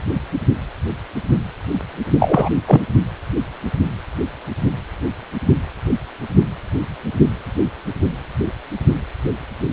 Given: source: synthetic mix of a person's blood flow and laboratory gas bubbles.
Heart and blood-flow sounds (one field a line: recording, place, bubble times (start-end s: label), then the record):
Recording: Doppler ultrasound of blood flow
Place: precordium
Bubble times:
2.19-2.52 s: bubbles
2.67-2.81 s: bubbles
From the record:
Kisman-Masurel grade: 213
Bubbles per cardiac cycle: several, 3 to 8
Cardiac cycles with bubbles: 1 to 10%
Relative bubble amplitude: loud (0.450 to 0.775)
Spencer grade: 1 (occasional bubble signal discernible with the cardiac motion signal, with majority of cardiac periods free of bubbles)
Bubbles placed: only in the low amplitude regions of the cardiac cycle